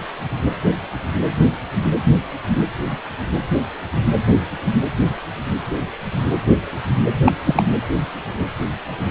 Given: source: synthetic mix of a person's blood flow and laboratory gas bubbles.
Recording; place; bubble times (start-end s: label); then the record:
Doppler ultrasound of blood flow; precordium
7.24-7.32 s: bubbles
7.44-7.63 s: bubbles
From the record:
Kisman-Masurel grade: 213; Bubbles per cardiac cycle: several, 3 to 8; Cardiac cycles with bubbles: 1 to 10%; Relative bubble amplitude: loud (0.450 to 0.775); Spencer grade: 1 (occasional bubble signal discernible with the cardiac motion signal, with majority of cardiac periods free of bubbles); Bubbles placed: anywhere in the cardiac cycle